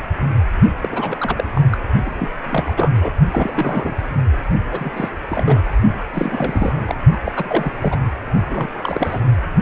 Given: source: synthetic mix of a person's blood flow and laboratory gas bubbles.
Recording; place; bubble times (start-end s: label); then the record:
Doppler ultrasound of blood flow; precordium
0.81-1.44 s: bubbles
1.54-1.61 s: bubbles
1.72-1.77 s: bubbles
2.05-2.10 s: bubbles
2.19-2.29 s: bubbles
2.42-2.94 s: bubbles
3.02-3.12 s: bubbles
3.32-3.97 s: bubbles
4.51-4.61 s: bubbles
4.71-5.09 s: bubbles
5.28-5.60 s: bubbles
6.14-6.95 s: bubbles
7.12-7.18 s: bubbles
7.26-7.72 s: bubbles
7.81-7.99 s: bubbles
8.46-8.69 s: bubbles
8.76-9.20 s: bubbles
From the record:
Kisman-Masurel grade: 332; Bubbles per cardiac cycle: rolling drumbeat, 9 or more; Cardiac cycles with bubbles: 50 to 99%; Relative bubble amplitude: moderate (0.250 to 0.450); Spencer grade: 3 (all of the cardiac periods contain showers or single bubble signals, but not dominating or overriding the cardiac motion signals); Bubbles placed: only in the low amplitude regions of the cardiac cycle